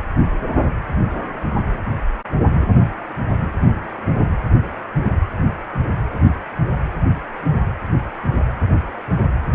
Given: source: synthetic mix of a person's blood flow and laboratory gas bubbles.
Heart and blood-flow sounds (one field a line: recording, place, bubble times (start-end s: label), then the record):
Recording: Doppler ultrasound of blood flow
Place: precordium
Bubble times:
no bubbles
From the record:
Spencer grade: 0 (complete lack of bubble signals)